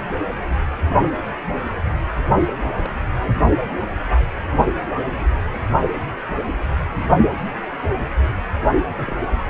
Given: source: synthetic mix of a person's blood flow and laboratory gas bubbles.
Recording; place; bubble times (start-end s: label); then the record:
Doppler ultrasound of blood flow; precordium
1.04-1.29 s: bubbles
1.65-1.70 s: bubbles
2.85-2.95 s: bubbles
8.98-9.17 s: bubbles
From the record:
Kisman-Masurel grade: 121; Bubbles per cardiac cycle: 1 to 2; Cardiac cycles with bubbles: 10 to 50%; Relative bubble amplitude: barely perceptible (0.100 to 0.250); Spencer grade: 2 (many but less than half of the cardiac periods contain bubble signals, singularly or in groups); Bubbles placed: only in the low amplitude regions of the cardiac cycle